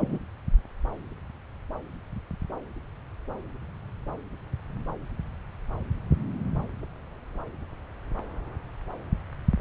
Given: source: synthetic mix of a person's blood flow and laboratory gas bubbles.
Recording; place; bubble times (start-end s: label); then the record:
Doppler ultrasound of blood flow; subclavian vein
0.00-0.18 s: bubbles
From the record:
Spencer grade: 1 (occasional bubble signal discernible with the cardiac motion signal, with majority of cardiac periods free of bubbles); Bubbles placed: anywhere in the cardiac cycle